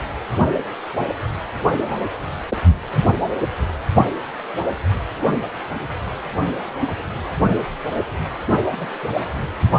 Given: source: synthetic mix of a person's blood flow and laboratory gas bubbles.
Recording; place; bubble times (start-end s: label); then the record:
Doppler ultrasound of blood flow; precordium
8.71-8.87 s: bubbles
From the record:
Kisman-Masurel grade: 111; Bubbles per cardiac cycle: 1 to 2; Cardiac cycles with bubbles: 1 to 10%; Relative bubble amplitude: barely perceptible (0.100 to 0.250); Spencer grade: 1 (occasional bubble signal discernible with the cardiac motion signal, with majority of cardiac periods free of bubbles); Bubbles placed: only in the low amplitude regions of the cardiac cycle